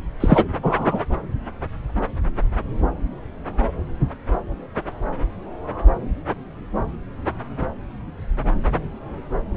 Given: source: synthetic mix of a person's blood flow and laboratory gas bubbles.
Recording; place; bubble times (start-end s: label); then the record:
Doppler ultrasound of blood flow; subclavian vein
0.20-0.45 s: bubbles
0.62-1.00 s: bubbles
From the record:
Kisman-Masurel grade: 213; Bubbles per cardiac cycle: several, 3 to 8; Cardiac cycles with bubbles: 1 to 10%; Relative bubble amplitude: loud (0.450 to 0.775); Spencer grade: 1 (occasional bubble signal discernible with the cardiac motion signal, with majority of cardiac periods free of bubbles); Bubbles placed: anywhere in the cardiac cycle